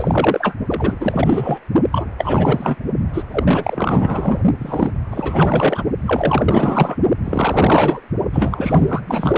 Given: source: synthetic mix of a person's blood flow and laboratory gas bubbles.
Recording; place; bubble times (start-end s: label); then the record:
Doppler ultrasound of blood flow; precordium
0.00-0.55 s: bubbles
0.67-0.96 s: bubbles
0.99-1.59 s: bubbles
1.92-2.07 s: bubbles
2.17-2.76 s: bubbles
3.13-3.23 s: bubbles
3.31-4.39 s: bubbles
4.58-4.92 s: bubbles
5.10-5.83 s: bubbles
6.05-6.96 s: bubbles
7.24-8.01 s: bubbles
8.32-9.01 s: bubbles
9.06-9.38 s: bubbles
From the record:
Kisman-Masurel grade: 444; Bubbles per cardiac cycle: continuous sound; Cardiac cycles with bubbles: 100%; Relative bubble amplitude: maximal (0.775 to 0.999); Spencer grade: 4 (maximum detectable bubble signal sounding continuously throughout systole and diastole of every cardiac period, and overriding the amplitude of the normal cardiac signals); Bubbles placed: only in the low amplitude regions of the cardiac cycle